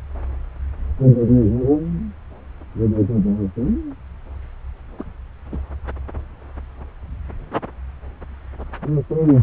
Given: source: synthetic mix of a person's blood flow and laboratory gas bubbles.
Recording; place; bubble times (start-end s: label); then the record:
Doppler ultrasound of blood flow; subclavian vein
4.99-5.12 s: bubbles
5.52-5.58 s: bubbles
From the record:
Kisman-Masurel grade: 211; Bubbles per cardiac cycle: several, 3 to 8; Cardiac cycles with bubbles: 1 to 10%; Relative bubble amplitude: barely perceptible (0.100 to 0.250); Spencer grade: 1 (occasional bubble signal discernible with the cardiac motion signal, with majority of cardiac periods free of bubbles); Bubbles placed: anywhere in the cardiac cycle